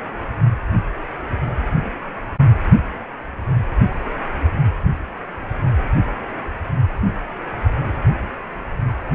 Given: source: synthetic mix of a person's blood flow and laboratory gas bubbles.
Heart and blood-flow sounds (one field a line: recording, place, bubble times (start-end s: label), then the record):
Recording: Doppler ultrasound of blood flow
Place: precordium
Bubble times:
no bubbles
From the record:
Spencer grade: 0 (complete lack of bubble signals)